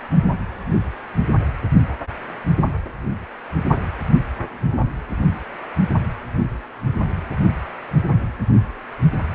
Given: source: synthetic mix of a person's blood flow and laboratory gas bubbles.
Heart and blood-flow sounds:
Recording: Doppler ultrasound of blood flow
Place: precordium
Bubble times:
no bubbles
From the record:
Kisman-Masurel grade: 000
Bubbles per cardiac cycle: 0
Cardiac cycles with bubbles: 0%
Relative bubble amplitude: no bubbles discernible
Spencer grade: 0 (complete lack of bubble signals)

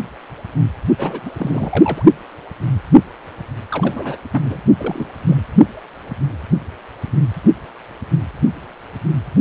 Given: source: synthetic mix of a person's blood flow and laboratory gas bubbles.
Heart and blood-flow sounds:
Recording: Doppler ultrasound of blood flow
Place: precordium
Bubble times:
0.98-1.20 s: bubbles
1.25-2.03 s: bubbles
3.71-4.17 s: bubbles
4.32-4.58 s: bubbles
4.78-5.09 s: bubbles
5.26-5.41 s: bubbles
From the record:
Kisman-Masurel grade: 221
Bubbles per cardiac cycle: several, 3 to 8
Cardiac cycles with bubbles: 10 to 50%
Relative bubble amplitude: barely perceptible (0.100 to 0.250)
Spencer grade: 2 (many but less than half of the cardiac periods contain bubble signals, singularly or in groups)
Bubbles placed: only in the low amplitude regions of the cardiac cycle

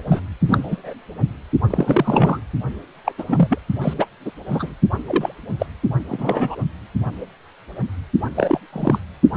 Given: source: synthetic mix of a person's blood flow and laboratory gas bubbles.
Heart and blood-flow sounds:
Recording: Doppler ultrasound of blood flow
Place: precordium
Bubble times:
0.11-0.20 s: bubbles
0.45-0.93 s: bubbles
1.70-2.41 s: bubbles
3.04-3.12 s: bubbles
3.18-3.58 s: bubbles
3.81-3.94 s: bubbles
3.98-4.07 s: bubbles
4.25-4.32 s: bubbles
4.50-4.75 s: bubbles
5.04-5.38 s: bubbles
5.59-5.66 s: bubbles
6.08-6.55 s: bubbles
8.36-8.60 s: bubbles
8.72-8.98 s: bubbles
9.35-9.37 s: bubbles
From the record:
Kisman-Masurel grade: 232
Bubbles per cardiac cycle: several, 3 to 8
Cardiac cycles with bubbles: 50 to 99%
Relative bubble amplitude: moderate (0.250 to 0.450)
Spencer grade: 3 (all of the cardiac periods contain showers or single bubble signals, but not dominating or overriding the cardiac motion signals)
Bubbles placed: only in the low amplitude regions of the cardiac cycle

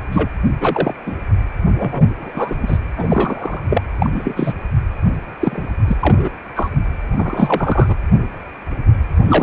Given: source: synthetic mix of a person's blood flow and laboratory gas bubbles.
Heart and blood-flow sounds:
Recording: Doppler ultrasound of blood flow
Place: precordium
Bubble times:
0.00-0.05 s: bubbles
0.12-0.30 s: bubbles
0.60-0.95 s: bubbles
1.05-1.16 s: bubbles
1.77-2.04 s: bubbles
2.08-2.78 s: bubbles
2.97-3.60 s: bubbles
3.69-3.82 s: bubbles
3.99-4.10 s: bubbles
4.14-4.54 s: bubbles
5.39-5.64 s: bubbles
5.87-5.96 s: bubbles
6.01-6.29 s: bubbles
6.55-6.70 s: bubbles
7.16-7.95 s: bubbles
9.27-9.43 s: bubbles
From the record:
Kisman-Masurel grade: 233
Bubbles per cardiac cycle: several, 3 to 8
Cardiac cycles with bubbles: 50 to 99%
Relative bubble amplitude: loud (0.450 to 0.775)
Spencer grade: 3 (all of the cardiac periods contain showers or single bubble signals, but not dominating or overriding the cardiac motion signals)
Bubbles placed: anywhere in the cardiac cycle

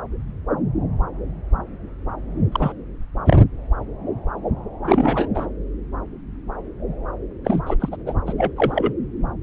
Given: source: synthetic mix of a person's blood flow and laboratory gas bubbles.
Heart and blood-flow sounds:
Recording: Doppler ultrasound of blood flow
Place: subclavian vein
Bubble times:
2.52-2.73 s: bubbles
3.25-3.37 s: bubbles
4.85-5.28 s: bubbles
5.35-5.47 s: bubbles
7.45-7.60 s: bubbles
7.66-7.75 s: bubbles
7.80-7.89 s: bubbles
7.92-7.97 s: bubbles
8.05-8.13 s: bubbles
8.26-8.33 s: bubbles
8.38-8.51 s: bubbles
8.56-8.93 s: bubbles
From the record:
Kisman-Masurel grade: 222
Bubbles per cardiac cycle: several, 3 to 8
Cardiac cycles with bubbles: 10 to 50%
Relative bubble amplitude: moderate (0.250 to 0.450)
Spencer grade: 2 (many but less than half of the cardiac periods contain bubble signals, singularly or in groups)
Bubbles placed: anywhere in the cardiac cycle

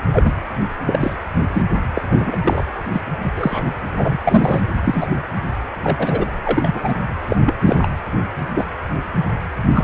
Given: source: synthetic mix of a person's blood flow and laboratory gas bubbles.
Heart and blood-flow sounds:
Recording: Doppler ultrasound of blood flow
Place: precordium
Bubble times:
0.12-0.32 s: bubbles
0.86-1.14 s: bubbles
1.53-1.62 s: bubbles
1.94-2.02 s: bubbles
2.11-2.37 s: bubbles
2.44-2.65 s: bubbles
2.92-3.02 s: bubbles
3.22-3.31 s: bubbles
3.37-3.74 s: bubbles
3.96-4.18 s: bubbles
4.24-4.62 s: bubbles
4.84-5.08 s: bubbles
5.83-6.26 s: bubbles
6.43-6.95 s: bubbles
7.27-7.37 s: bubbles
7.46-7.54 s: bubbles
7.63-7.88 s: bubbles
8.54-8.66 s: bubbles
9.74-9.84 s: bubbles
From the record:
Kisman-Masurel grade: 233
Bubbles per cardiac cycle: several, 3 to 8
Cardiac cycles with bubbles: 50 to 99%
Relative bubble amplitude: loud (0.450 to 0.775)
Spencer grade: 3 (all of the cardiac periods contain showers or single bubble signals, but not dominating or overriding the cardiac motion signals)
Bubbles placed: anywhere in the cardiac cycle

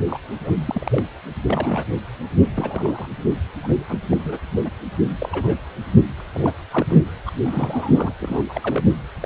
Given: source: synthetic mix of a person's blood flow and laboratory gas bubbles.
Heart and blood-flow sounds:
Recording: Doppler ultrasound of blood flow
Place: precordium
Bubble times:
0.08-0.18 s: bubbles
0.45-0.53 s: bubbles
0.66-1.04 s: bubbles
1.48-1.84 s: bubbles
2.54-3.05 s: bubbles
3.60-3.78 s: bubbles
3.89-3.99 s: bubbles
4.11-4.17 s: bubbles
4.24-4.39 s: bubbles
4.64-4.71 s: bubbles
5.21-5.57 s: bubbles
6.17-6.21 s: bubbles
6.33-6.54 s: bubbles
6.72-6.98 s: bubbles
7.26-7.31 s: bubbles
7.44-8.12 s: bubbles
8.21-8.45 s: bubbles
8.49-8.83 s: bubbles
9.21-9.26 s: bubbles
From the record:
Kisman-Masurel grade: 242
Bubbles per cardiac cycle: several, 3 to 8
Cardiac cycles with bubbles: 100%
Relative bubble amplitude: moderate (0.250 to 0.450)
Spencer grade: 3 (all of the cardiac periods contain showers or single bubble signals, but not dominating or overriding the cardiac motion signals)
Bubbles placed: anywhere in the cardiac cycle

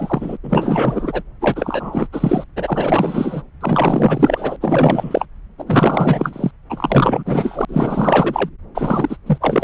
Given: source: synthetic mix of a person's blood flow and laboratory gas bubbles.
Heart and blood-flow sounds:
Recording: Doppler ultrasound of blood flow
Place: subclavian vein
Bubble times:
0.00-0.37 s: bubbles
0.43-1.23 s: bubbles
1.41-2.07 s: bubbles
2.12-2.44 s: bubbles
2.56-3.42 s: bubbles
3.60-4.56 s: bubbles
4.60-5.26 s: bubbles
5.58-6.51 s: bubbles
6.69-7.65 s: bubbles
7.68-8.50 s: bubbles
8.74-9.17 s: bubbles
9.26-9.38 s: bubbles
9.40-9.63 s: bubbles
From the record:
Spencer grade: 4 (maximum detectable bubble signal sounding continuously throughout systole and diastole of every cardiac period, and overriding the amplitude of the normal cardiac signals)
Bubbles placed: anywhere in the cardiac cycle

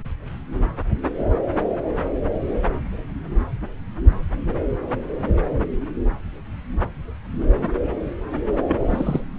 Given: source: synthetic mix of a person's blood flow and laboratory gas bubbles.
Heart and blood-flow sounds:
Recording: Doppler ultrasound of blood flow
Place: subclavian vein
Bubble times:
8.68-9.21 s: bubbles
From the record:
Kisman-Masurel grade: 211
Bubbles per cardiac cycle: several, 3 to 8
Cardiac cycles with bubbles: 1 to 10%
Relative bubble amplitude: barely perceptible (0.100 to 0.250)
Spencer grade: 1 (occasional bubble signal discernible with the cardiac motion signal, with majority of cardiac periods free of bubbles)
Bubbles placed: anywhere in the cardiac cycle

